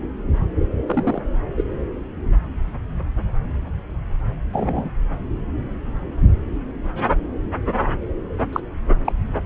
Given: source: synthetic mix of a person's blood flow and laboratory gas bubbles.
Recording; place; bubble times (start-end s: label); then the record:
Doppler ultrasound of blood flow; subclavian vein
0.86-1.21 s: bubbles
1.57-1.62 s: bubbles
4.53-4.91 s: bubbles
8.53-8.60 s: bubbles
9.05-9.12 s: bubbles
From the record:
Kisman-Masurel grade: 122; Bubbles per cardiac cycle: 1 to 2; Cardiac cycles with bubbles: 10 to 50%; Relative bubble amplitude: moderate (0.250 to 0.450); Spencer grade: 2 (many but less than half of the cardiac periods contain bubble signals, singularly or in groups); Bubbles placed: anywhere in the cardiac cycle